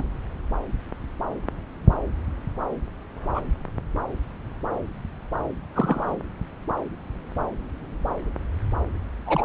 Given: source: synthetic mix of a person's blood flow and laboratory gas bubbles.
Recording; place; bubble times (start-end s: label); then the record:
Doppler ultrasound of blood flow; subclavian vein
0.00-0.03 s: bubbles
3.34-3.41 s: bubbles
5.75-6.17 s: bubbles
9.26-9.45 s: bubbles
From the record:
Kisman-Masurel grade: 122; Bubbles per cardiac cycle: 1 to 2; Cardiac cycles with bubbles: 10 to 50%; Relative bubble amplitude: moderate (0.250 to 0.450); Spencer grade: 2 (many but less than half of the cardiac periods contain bubble signals, singularly or in groups); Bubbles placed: anywhere in the cardiac cycle